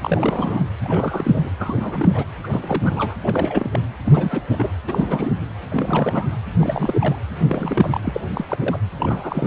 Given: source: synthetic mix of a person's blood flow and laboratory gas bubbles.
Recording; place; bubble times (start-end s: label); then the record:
Doppler ultrasound of blood flow; precordium
0.01-0.63 s: bubbles
0.83-1.50 s: bubbles
1.58-2.25 s: bubbles
2.44-2.48 s: bubbles
2.50-3.14 s: bubbles
3.21-3.81 s: bubbles
4.04-4.46 s: bubbles
4.49-4.70 s: bubbles
4.87-5.31 s: bubbles
5.70-6.29 s: bubbles
6.60-7.21 s: bubbles
7.39-8.01 s: bubbles
8.04-8.21 s: bubbles
8.34-8.46 s: bubbles
8.50-8.78 s: bubbles
8.97-9.47 s: bubbles
From the record:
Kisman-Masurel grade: 342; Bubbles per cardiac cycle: rolling drumbeat, 9 or more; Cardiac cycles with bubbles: 100%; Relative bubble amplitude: moderate (0.250 to 0.450); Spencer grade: 3 (all of the cardiac periods contain showers or single bubble signals, but not dominating or overriding the cardiac motion signals); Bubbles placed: anywhere in the cardiac cycle